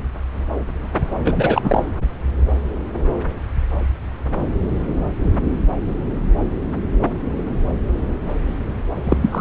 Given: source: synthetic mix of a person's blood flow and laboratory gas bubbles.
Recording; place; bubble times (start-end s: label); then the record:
Doppler ultrasound of blood flow; subclavian vein
1.25-1.83 s: bubbles
9.04-9.17 s: bubbles
9.21-9.41 s: bubbles
From the record:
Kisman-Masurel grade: 223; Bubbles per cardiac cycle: several, 3 to 8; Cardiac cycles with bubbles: 10 to 50%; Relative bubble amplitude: loud (0.450 to 0.775); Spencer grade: 2 (many but less than half of the cardiac periods contain bubble signals, singularly or in groups); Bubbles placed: anywhere in the cardiac cycle